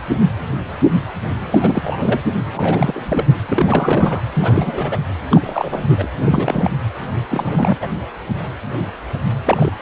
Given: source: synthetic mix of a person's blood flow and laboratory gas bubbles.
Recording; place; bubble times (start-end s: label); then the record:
Doppler ultrasound of blood flow; precordium
1.51-2.20 s: bubbles
2.52-3.26 s: bubbles
3.28-3.38 s: bubbles
3.46-4.21 s: bubbles
4.33-5.00 s: bubbles
5.31-5.85 s: bubbles
5.89-6.08 s: bubbles
6.17-6.71 s: bubbles
7.29-7.78 s: bubbles
7.81-7.88 s: bubbles
9.45-9.72 s: bubbles
From the record:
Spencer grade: 3 (all of the cardiac periods contain showers or single bubble signals, but not dominating or overriding the cardiac motion signals); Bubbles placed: anywhere in the cardiac cycle